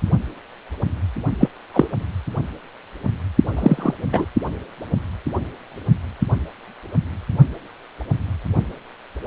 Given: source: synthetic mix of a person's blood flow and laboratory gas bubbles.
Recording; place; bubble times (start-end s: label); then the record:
Doppler ultrasound of blood flow; precordium
1.40-1.49 s: bubbles
1.74-1.88 s: bubbles
3.56-3.94 s: bubbles
4.12-4.25 s: bubbles
From the record:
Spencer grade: 2 (many but less than half of the cardiac periods contain bubble signals, singularly or in groups); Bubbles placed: only in the low amplitude regions of the cardiac cycle